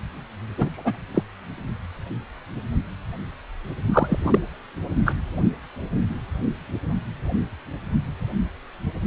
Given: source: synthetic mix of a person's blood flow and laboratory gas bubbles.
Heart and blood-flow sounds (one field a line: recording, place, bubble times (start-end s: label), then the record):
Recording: Doppler ultrasound of blood flow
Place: precordium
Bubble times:
0.57-0.69 s: bubbles
0.72-0.97 s: bubbles
1.14-1.23 s: bubbles
3.90-4.39 s: bubbles
5.05-5.15 s: bubbles
From the record:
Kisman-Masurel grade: 223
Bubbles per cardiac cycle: several, 3 to 8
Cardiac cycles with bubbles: 10 to 50%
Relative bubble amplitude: loud (0.450 to 0.775)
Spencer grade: 2 (many but less than half of the cardiac periods contain bubble signals, singularly or in groups)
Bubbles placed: only in the low amplitude regions of the cardiac cycle